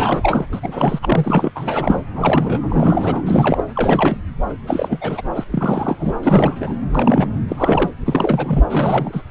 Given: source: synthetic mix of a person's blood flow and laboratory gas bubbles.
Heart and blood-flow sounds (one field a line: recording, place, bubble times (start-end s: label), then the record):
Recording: Doppler ultrasound of blood flow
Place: subclavian vein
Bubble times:
0.00-0.45 s: bubbles
0.52-0.60 s: bubbles
0.63-0.99 s: bubbles
1.02-1.52 s: bubbles
1.55-2.02 s: bubbles
2.15-3.22 s: bubbles
3.25-3.64 s: bubbles
3.75-4.18 s: bubbles
4.49-4.54 s: bubbles
4.67-5.22 s: bubbles
5.35-5.44 s: bubbles
5.52-5.96 s: bubbles
5.99-6.13 s: bubbles
6.21-6.55 s: bubbles
6.60-6.76 s: bubbles
6.95-7.28 s: bubbles
7.48-7.91 s: bubbles
8.05-8.63 s: bubbles
8.70-9.22 s: bubbles
From the record:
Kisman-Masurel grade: 343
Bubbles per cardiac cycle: rolling drumbeat, 9 or more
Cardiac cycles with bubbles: 100%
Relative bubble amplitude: loud (0.450 to 0.775)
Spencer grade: 3 (all of the cardiac periods contain showers or single bubble signals, but not dominating or overriding the cardiac motion signals)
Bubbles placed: anywhere in the cardiac cycle